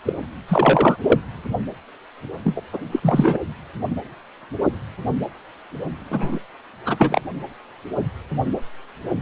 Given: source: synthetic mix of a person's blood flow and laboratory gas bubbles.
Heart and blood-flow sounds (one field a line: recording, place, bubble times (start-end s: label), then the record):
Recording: Doppler ultrasound of blood flow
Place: precordium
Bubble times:
0.05-0.13 s: bubbles
0.48-0.96 s: bubbles
1.03-1.20 s: bubbles
2.45-2.60 s: bubbles
2.73-2.78 s: bubbles
2.91-3.00 s: bubbles
3.03-3.39 s: bubbles
6.10-6.38 s: bubbles
6.85-6.96 s: bubbles
6.99-7.21 s: bubbles
From the record:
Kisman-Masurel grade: 232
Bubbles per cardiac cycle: several, 3 to 8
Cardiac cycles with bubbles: 50 to 99%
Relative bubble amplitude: moderate (0.250 to 0.450)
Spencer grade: 3 (all of the cardiac periods contain showers or single bubble signals, but not dominating or overriding the cardiac motion signals)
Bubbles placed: anywhere in the cardiac cycle